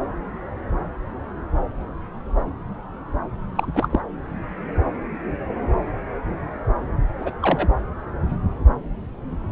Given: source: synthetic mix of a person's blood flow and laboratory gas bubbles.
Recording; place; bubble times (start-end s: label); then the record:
Doppler ultrasound of blood flow; subclavian vein
3.55-3.71 s: bubbles
3.74-4.00 s: bubbles
7.18-7.31 s: bubbles
7.42-7.68 s: bubbles
From the record:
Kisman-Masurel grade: 222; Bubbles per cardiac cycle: several, 3 to 8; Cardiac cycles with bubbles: 10 to 50%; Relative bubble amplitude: moderate (0.250 to 0.450); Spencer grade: 2 (many but less than half of the cardiac periods contain bubble signals, singularly or in groups); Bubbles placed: anywhere in the cardiac cycle